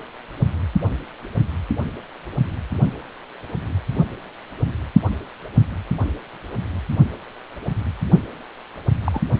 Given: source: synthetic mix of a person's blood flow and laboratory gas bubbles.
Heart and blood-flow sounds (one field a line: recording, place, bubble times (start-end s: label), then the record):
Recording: Doppler ultrasound of blood flow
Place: precordium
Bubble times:
9.04-9.22 s: bubbles
From the record:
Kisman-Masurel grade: 112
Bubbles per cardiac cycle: 1 to 2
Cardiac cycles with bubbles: 1 to 10%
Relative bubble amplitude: moderate (0.250 to 0.450)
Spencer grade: 1 (occasional bubble signal discernible with the cardiac motion signal, with majority of cardiac periods free of bubbles)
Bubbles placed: only in the low amplitude regions of the cardiac cycle